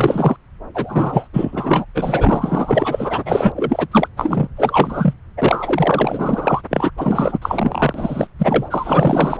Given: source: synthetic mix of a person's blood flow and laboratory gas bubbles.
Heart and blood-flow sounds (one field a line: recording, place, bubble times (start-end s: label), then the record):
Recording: Doppler ultrasound of blood flow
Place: subclavian vein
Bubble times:
0.00-0.37 s: bubbles
0.74-1.28 s: bubbles
1.33-1.85 s: bubbles
1.94-3.52 s: bubbles
3.55-3.87 s: bubbles
3.91-4.08 s: bubbles
4.17-4.47 s: bubbles
4.56-5.13 s: bubbles
5.37-6.62 s: bubbles
6.71-6.91 s: bubbles
6.97-7.39 s: bubbles
7.42-8.27 s: bubbles
8.38-9.40 s: bubbles
From the record:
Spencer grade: 4 (maximum detectable bubble signal sounding continuously throughout systole and diastole of every cardiac period, and overriding the amplitude of the normal cardiac signals)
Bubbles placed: anywhere in the cardiac cycle